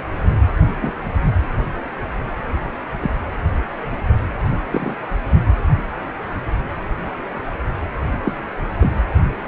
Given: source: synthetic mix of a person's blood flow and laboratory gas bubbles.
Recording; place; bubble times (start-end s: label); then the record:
Doppler ultrasound of blood flow; precordium
0.81-0.92 s: bubbles
3.02-3.09 s: bubbles
4.72-4.96 s: bubbles
8.25-8.33 s: bubbles
8.81-8.93 s: bubbles
From the record:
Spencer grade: 2 (many but less than half of the cardiac periods contain bubble signals, singularly or in groups); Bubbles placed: anywhere in the cardiac cycle